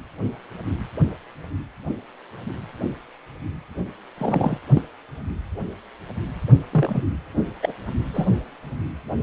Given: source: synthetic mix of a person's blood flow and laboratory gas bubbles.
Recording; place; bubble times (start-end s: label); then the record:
Doppler ultrasound of blood flow; precordium
4.17-4.57 s: bubbles
4.75-4.82 s: bubbles
6.73-7.04 s: bubbles
7.62-7.74 s: bubbles
8.14-8.30 s: bubbles
From the record:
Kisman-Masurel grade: 122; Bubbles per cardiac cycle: 1 to 2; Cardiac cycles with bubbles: 10 to 50%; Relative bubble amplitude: moderate (0.250 to 0.450); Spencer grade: 2 (many but less than half of the cardiac periods contain bubble signals, singularly or in groups); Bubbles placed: anywhere in the cardiac cycle